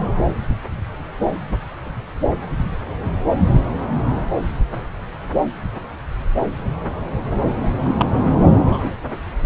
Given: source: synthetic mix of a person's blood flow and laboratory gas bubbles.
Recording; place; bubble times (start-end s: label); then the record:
Doppler ultrasound of blood flow; subclavian vein
7.82-7.95 s: bubbles
7.97-8.05 s: bubbles
8.65-8.90 s: bubbles
From the record:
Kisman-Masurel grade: 122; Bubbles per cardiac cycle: 1 to 2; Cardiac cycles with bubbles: 10 to 50%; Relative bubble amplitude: moderate (0.250 to 0.450); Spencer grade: 2 (many but less than half of the cardiac periods contain bubble signals, singularly or in groups); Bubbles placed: anywhere in the cardiac cycle